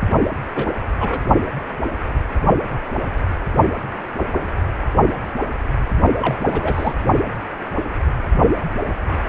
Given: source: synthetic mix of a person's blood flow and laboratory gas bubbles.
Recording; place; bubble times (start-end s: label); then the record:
Doppler ultrasound of blood flow; precordium
0.55-0.71 s: bubbles
0.98-1.20 s: bubbles
6.20-6.95 s: bubbles
From the record:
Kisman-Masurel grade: 222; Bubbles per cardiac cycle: several, 3 to 8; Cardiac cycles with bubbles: 10 to 50%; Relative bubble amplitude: moderate (0.250 to 0.450); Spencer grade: 2 (many but less than half of the cardiac periods contain bubble signals, singularly or in groups); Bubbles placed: only in the low amplitude regions of the cardiac cycle